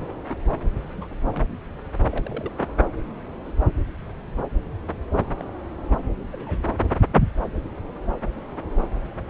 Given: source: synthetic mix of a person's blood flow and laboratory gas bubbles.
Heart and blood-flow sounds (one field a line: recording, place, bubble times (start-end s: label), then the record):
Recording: Doppler ultrasound of blood flow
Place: subclavian vein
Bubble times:
0.84-1.07 s: bubbles
1.31-1.44 s: bubbles
2.10-2.52 s: bubbles
3.45-3.53 s: bubbles
5.38-5.46 s: bubbles
6.31-6.68 s: bubbles
From the record:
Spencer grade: 2 (many but less than half of the cardiac periods contain bubble signals, singularly or in groups)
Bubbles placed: anywhere in the cardiac cycle